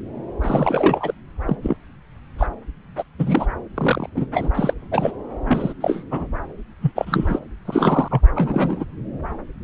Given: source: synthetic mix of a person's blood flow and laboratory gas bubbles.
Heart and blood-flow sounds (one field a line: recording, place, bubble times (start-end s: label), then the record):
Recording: Doppler ultrasound of blood flow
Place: subclavian vein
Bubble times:
0.41-1.14 s: bubbles
1.46-1.56 s: bubbles
1.61-1.76 s: bubbles
2.38-2.46 s: bubbles
2.98-3.04 s: bubbles
3.19-3.46 s: bubbles
3.75-4.10 s: bubbles
4.14-4.27 s: bubbles
4.34-4.52 s: bubbles
4.55-4.74 s: bubbles
4.92-5.12 s: bubbles
5.46-5.73 s: bubbles
5.81-6.04 s: bubbles
6.11-6.27 s: bubbles
6.82-6.92 s: bubbles
6.95-7.39 s: bubbles
7.65-8.21 s: bubbles
8.35-8.85 s: bubbles
From the record:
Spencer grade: 3 (all of the cardiac periods contain showers or single bubble signals, but not dominating or overriding the cardiac motion signals)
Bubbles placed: anywhere in the cardiac cycle